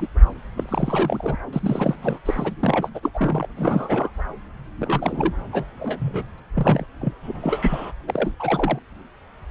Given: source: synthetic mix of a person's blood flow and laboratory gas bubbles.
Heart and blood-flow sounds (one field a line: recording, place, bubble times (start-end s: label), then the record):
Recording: Doppler ultrasound of blood flow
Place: subclavian vein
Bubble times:
0.00-0.08 s: bubbles
0.57-1.37 s: bubbles
1.53-1.96 s: bubbles
2.02-2.19 s: bubbles
2.25-2.54 s: bubbles
2.60-2.90 s: bubbles
2.94-3.11 s: bubbles
3.14-3.48 s: bubbles
3.57-4.11 s: bubbles
4.79-5.33 s: bubbles
5.52-5.65 s: bubbles
5.79-6.27 s: bubbles
6.38-6.40 s: bubbles
6.54-6.86 s: bubbles
7.00-7.13 s: bubbles
7.22-7.92 s: bubbles
8.07-8.34 s: bubbles
8.39-8.79 s: bubbles
From the record:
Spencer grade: 3 (all of the cardiac periods contain showers or single bubble signals, but not dominating or overriding the cardiac motion signals)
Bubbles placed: anywhere in the cardiac cycle